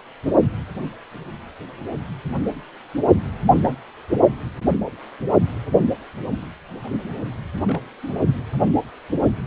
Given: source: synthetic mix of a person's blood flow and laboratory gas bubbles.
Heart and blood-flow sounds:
Doppler ultrasound of blood flow; precordium
3.45-3.77 s: bubbles
7.66-7.81 s: bubbles
8.03-8.13 s: bubbles
From the record:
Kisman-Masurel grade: 121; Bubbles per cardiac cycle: 1 to 2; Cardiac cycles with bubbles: 10 to 50%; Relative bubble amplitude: barely perceptible (0.100 to 0.250); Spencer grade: 2 (many but less than half of the cardiac periods contain bubble signals, singularly or in groups); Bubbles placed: only in the low amplitude regions of the cardiac cycle

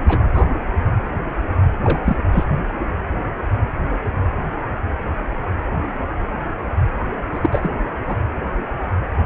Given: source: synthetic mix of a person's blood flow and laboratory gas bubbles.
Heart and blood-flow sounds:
Doppler ultrasound of blood flow; precordium
0.08-0.18 s: bubbles
0.34-0.43 s: bubbles
1.84-2.00 s: bubbles
2.04-2.17 s: bubbles
2.32-2.44 s: bubbles
7.33-7.39 s: bubbles
7.42-7.71 s: bubbles
8.08-8.16 s: bubbles
From the record:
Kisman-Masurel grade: 222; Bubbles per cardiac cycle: several, 3 to 8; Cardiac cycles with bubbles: 10 to 50%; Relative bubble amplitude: moderate (0.250 to 0.450); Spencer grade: 2 (many but less than half of the cardiac periods contain bubble signals, singularly or in groups); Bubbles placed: anywhere in the cardiac cycle

